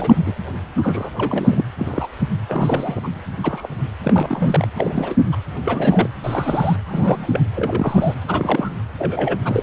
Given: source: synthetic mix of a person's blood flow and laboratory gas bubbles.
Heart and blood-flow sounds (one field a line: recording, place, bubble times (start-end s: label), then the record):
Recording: Doppler ultrasound of blood flow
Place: precordium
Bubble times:
0.00-0.18 s: bubbles
0.26-0.34 s: bubbles
0.77-1.09 s: bubbles
1.16-1.64 s: bubbles
1.78-2.07 s: bubbles
2.20-2.28 s: bubbles
2.48-3.01 s: bubbles
3.04-3.08 s: bubbles
3.43-3.68 s: bubbles
4.03-4.68 s: bubbles
4.76-5.16 s: bubbles
5.32-5.37 s: bubbles
5.65-6.10 s: bubbles
6.23-6.76 s: bubbles
6.86-7.43 s: bubbles
7.55-8.15 s: bubbles
8.28-8.70 s: bubbles
8.98-9.38 s: bubbles
9.45-9.63 s: bubbles
From the record:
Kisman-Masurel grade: 242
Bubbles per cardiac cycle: several, 3 to 8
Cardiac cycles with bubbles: 100%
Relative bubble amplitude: moderate (0.250 to 0.450)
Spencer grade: 3 (all of the cardiac periods contain showers or single bubble signals, but not dominating or overriding the cardiac motion signals)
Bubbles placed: anywhere in the cardiac cycle